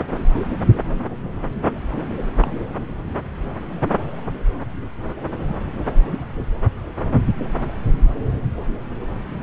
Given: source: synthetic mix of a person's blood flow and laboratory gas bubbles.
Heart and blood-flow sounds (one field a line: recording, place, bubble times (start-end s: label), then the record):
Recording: Doppler ultrasound of blood flow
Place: subclavian vein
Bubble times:
2.42-2.48 s: bubbles
From the record:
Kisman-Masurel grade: 111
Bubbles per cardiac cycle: 1 to 2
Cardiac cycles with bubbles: 1 to 10%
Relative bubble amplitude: barely perceptible (0.100 to 0.250)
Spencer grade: 1 (occasional bubble signal discernible with the cardiac motion signal, with majority of cardiac periods free of bubbles)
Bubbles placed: anywhere in the cardiac cycle